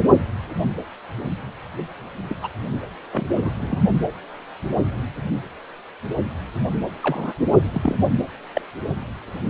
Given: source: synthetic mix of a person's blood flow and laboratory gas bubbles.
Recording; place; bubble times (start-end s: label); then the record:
Doppler ultrasound of blood flow; precordium
2.29-2.35 s: bubbles
2.42-2.48 s: bubbles
3.11-3.51 s: bubbles
3.59-3.78 s: bubbles
7.02-7.33 s: bubbles
7.74-7.95 s: bubbles
8.54-8.62 s: bubbles
From the record:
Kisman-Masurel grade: 122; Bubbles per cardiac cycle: 1 to 2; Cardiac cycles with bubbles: 10 to 50%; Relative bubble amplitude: moderate (0.250 to 0.450); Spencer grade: 2 (many but less than half of the cardiac periods contain bubble signals, singularly or in groups); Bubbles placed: anywhere in the cardiac cycle